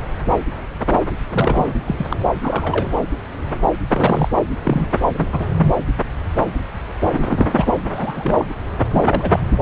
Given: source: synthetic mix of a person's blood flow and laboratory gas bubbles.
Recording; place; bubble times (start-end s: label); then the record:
Doppler ultrasound of blood flow; subclavian vein
1.33-1.79 s: bubbles
1.85-2.06 s: bubbles
2.09-2.17 s: bubbles
2.42-2.90 s: bubbles
3.89-4.29 s: bubbles
4.36-4.42 s: bubbles
4.64-4.89 s: bubbles
5.13-5.27 s: bubbles
5.32-5.46 s: bubbles
7.12-7.72 s: bubbles
7.89-8.45 s: bubbles
8.94-9.02 s: bubbles
9.07-9.40 s: bubbles
9.51-9.58 s: bubbles
From the record:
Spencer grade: 3 (all of the cardiac periods contain showers or single bubble signals, but not dominating or overriding the cardiac motion signals); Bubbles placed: anywhere in the cardiac cycle